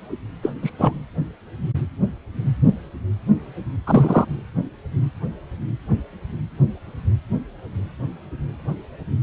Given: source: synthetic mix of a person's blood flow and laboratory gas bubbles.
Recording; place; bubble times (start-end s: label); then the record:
Doppler ultrasound of blood flow; precordium
0.43-0.52 s: bubbles
0.62-0.70 s: bubbles
0.78-1.01 s: bubbles
3.86-4.25 s: bubbles
From the record:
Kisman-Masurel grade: 223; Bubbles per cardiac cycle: several, 3 to 8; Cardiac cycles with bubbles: 10 to 50%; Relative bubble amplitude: loud (0.450 to 0.775); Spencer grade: 2 (many but less than half of the cardiac periods contain bubble signals, singularly or in groups); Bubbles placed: anywhere in the cardiac cycle